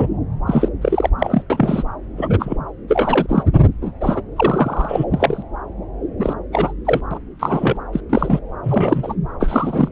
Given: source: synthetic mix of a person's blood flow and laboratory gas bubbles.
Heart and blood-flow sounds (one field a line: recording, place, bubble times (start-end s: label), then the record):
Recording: Doppler ultrasound of blood flow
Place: subclavian vein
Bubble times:
0.00-0.07 s: bubbles
0.47-0.69 s: bubbles
0.81-1.09 s: bubbles
1.18-1.42 s: bubbles
1.50-1.83 s: bubbles
2.17-2.56 s: bubbles
2.88-3.44 s: bubbles
3.81-3.92 s: bubbles
4.00-4.21 s: bubbles
4.36-5.04 s: bubbles
5.10-5.42 s: bubbles
6.20-6.33 s: bubbles
6.52-6.73 s: bubbles
6.84-7.00 s: bubbles
7.10-7.18 s: bubbles
7.39-7.77 s: bubbles
7.93-8.01 s: bubbles
8.10-8.39 s: bubbles
8.62-9.15 s: bubbles
9.39-9.88 s: bubbles
From the record:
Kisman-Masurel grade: 243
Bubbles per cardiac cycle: several, 3 to 8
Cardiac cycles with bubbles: 100%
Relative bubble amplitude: loud (0.450 to 0.775)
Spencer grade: 3 (all of the cardiac periods contain showers or single bubble signals, but not dominating or overriding the cardiac motion signals)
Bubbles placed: anywhere in the cardiac cycle